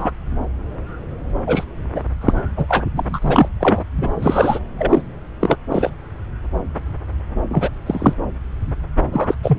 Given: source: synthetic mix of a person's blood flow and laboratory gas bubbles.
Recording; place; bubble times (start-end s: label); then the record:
Doppler ultrasound of blood flow; subclavian vein
0.00-0.11 s: bubbles
1.47-1.64 s: bubbles
1.94-2.00 s: bubbles
2.21-2.34 s: bubbles
2.56-2.66 s: bubbles
2.69-2.84 s: bubbles
2.95-3.19 s: bubbles
3.21-3.48 s: bubbles
3.60-3.84 s: bubbles
3.97-4.09 s: bubbles
4.20-4.59 s: bubbles
4.78-5.02 s: bubbles
5.40-5.57 s: bubbles
5.69-5.90 s: bubbles
7.49-7.70 s: bubbles
7.86-8.13 s: bubbles
9.11-9.35 s: bubbles
9.43-9.59 s: bubbles
From the record:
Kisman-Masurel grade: 233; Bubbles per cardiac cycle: several, 3 to 8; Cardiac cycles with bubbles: 50 to 99%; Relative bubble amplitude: loud (0.450 to 0.775); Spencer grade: 3 (all of the cardiac periods contain showers or single bubble signals, but not dominating or overriding the cardiac motion signals); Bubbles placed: anywhere in the cardiac cycle